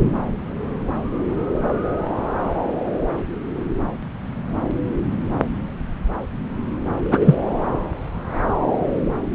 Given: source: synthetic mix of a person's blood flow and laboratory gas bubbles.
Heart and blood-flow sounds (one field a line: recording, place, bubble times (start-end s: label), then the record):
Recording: Doppler ultrasound of blood flow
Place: subclavian vein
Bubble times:
7.11-7.35 s: bubbles
From the record:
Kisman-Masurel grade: 213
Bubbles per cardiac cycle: several, 3 to 8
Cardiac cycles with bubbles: 1 to 10%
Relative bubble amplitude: loud (0.450 to 0.775)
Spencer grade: 1 (occasional bubble signal discernible with the cardiac motion signal, with majority of cardiac periods free of bubbles)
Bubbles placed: anywhere in the cardiac cycle